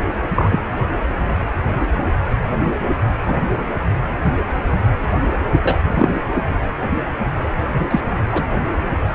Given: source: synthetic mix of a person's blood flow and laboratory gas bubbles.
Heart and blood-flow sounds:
Doppler ultrasound of blood flow; precordium
0.35-0.63 s: bubbles
3.27-3.37 s: bubbles
5.63-5.80 s: bubbles
5.88-6.08 s: bubbles
7.90-8.01 s: bubbles
8.32-8.44 s: bubbles
From the record:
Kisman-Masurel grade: 123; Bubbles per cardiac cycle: 1 to 2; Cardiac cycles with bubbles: 10 to 50%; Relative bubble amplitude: loud (0.450 to 0.775); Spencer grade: 2 (many but less than half of the cardiac periods contain bubble signals, singularly or in groups); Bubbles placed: anywhere in the cardiac cycle

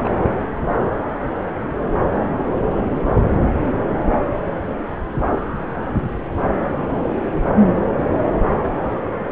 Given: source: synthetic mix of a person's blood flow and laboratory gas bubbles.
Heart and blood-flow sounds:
Doppler ultrasound of blood flow; subclavian vein
0.04-0.09 s: bubbles
From the record:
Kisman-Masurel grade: 112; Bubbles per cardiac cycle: 1 to 2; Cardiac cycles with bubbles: 1 to 10%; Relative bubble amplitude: moderate (0.250 to 0.450); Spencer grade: 1 (occasional bubble signal discernible with the cardiac motion signal, with majority of cardiac periods free of bubbles); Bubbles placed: anywhere in the cardiac cycle

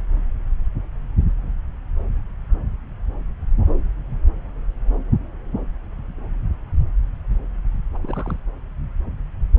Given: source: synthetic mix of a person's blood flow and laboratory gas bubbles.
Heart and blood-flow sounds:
Doppler ultrasound of blood flow; subclavian vein
7.95-7.98 s: bubbles
8.02-8.38 s: bubbles
From the record:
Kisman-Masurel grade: 211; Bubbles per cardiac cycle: several, 3 to 8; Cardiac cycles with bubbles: 1 to 10%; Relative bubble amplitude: barely perceptible (0.100 to 0.250); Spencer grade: 1 (occasional bubble signal discernible with the cardiac motion signal, with majority of cardiac periods free of bubbles); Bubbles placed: anywhere in the cardiac cycle

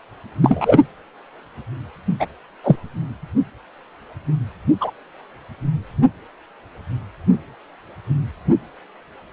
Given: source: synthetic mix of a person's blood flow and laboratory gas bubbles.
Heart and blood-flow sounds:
Doppler ultrasound of blood flow; precordium
0.41-0.78 s: bubbles
2.20-2.26 s: bubbles
2.63-2.76 s: bubbles
4.80-4.91 s: bubbles
From the record:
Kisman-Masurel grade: 123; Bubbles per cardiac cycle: 1 to 2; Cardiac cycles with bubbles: 10 to 50%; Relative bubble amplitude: loud (0.450 to 0.775); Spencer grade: 2 (many but less than half of the cardiac periods contain bubble signals, singularly or in groups); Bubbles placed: anywhere in the cardiac cycle

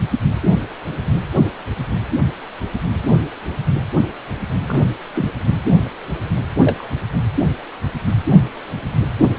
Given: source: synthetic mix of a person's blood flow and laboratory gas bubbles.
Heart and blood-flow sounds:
Doppler ultrasound of blood flow; precordium
4.67-4.83 s: bubbles
5.14-5.31 s: bubbles
6.60-6.88 s: bubbles
From the record:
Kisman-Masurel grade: 122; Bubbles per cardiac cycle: 1 to 2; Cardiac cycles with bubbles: 10 to 50%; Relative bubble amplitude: moderate (0.250 to 0.450); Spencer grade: 2 (many but less than half of the cardiac periods contain bubble signals, singularly or in groups); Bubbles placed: anywhere in the cardiac cycle

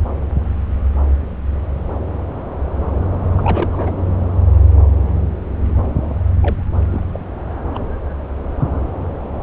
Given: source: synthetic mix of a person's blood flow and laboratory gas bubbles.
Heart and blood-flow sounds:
Doppler ultrasound of blood flow; subclavian vein
3.37-3.90 s: bubbles
6.42-6.63 s: bubbles
6.90-7.01 s: bubbles
7.13-7.20 s: bubbles
7.74-7.79 s: bubbles
From the record:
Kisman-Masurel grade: 221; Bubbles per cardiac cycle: several, 3 to 8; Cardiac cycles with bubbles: 10 to 50%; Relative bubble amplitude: barely perceptible (0.100 to 0.250); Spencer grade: 2 (many but less than half of the cardiac periods contain bubble signals, singularly or in groups); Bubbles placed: anywhere in the cardiac cycle

